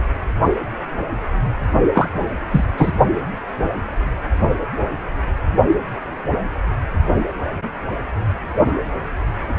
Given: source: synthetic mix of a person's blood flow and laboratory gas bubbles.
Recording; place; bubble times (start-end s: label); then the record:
Doppler ultrasound of blood flow; precordium
1.93-2.08 s: bubbles
2.50-2.64 s: bubbles
2.78-2.92 s: bubbles
From the record:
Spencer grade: 1 (occasional bubble signal discernible with the cardiac motion signal, with majority of cardiac periods free of bubbles); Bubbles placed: only in the low amplitude regions of the cardiac cycle